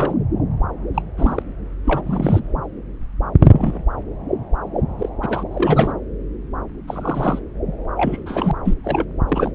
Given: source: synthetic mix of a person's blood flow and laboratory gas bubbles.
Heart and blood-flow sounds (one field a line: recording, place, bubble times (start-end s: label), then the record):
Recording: Doppler ultrasound of blood flow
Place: subclavian vein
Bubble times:
0.00-0.23 s: bubbles
0.94-1.02 s: bubbles
1.17-1.43 s: bubbles
1.85-2.02 s: bubbles
2.05-2.41 s: bubbles
3.41-3.83 s: bubbles
4.99-5.09 s: bubbles
5.22-5.43 s: bubbles
5.51-5.94 s: bubbles
6.87-7.39 s: bubbles
7.96-8.52 s: bubbles
8.64-8.75 s: bubbles
8.84-9.04 s: bubbles
9.28-9.51 s: bubbles
From the record:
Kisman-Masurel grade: 232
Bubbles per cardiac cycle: several, 3 to 8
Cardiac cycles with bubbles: 50 to 99%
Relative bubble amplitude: moderate (0.250 to 0.450)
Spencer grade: 3 (all of the cardiac periods contain showers or single bubble signals, but not dominating or overriding the cardiac motion signals)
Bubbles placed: anywhere in the cardiac cycle